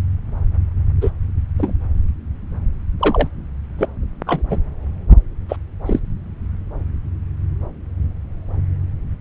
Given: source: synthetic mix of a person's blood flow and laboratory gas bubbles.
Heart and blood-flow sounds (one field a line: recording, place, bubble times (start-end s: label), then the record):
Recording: Doppler ultrasound of blood flow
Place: subclavian vein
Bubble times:
1.01-1.10 s: bubbles
1.57-1.74 s: bubbles
3.00-3.28 s: bubbles
3.79-3.85 s: bubbles
4.26-4.42 s: bubbles
4.50-4.58 s: bubbles
5.48-5.56 s: bubbles
5.85-5.99 s: bubbles
From the record:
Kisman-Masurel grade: 123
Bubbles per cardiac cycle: 1 to 2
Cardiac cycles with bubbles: 10 to 50%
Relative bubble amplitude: loud (0.450 to 0.775)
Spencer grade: 2 (many but less than half of the cardiac periods contain bubble signals, singularly or in groups)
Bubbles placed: anywhere in the cardiac cycle